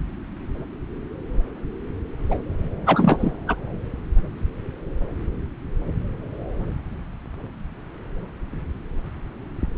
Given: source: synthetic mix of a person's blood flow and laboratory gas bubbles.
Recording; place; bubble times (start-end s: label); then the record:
Doppler ultrasound of blood flow; subclavian vein
2.29-2.38 s: bubbles
2.86-3.31 s: bubbles
3.48-3.56 s: bubbles
From the record:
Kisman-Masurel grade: 223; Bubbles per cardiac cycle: several, 3 to 8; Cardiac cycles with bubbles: 10 to 50%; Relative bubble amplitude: loud (0.450 to 0.775); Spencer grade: 2 (many but less than half of the cardiac periods contain bubble signals, singularly or in groups); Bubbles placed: anywhere in the cardiac cycle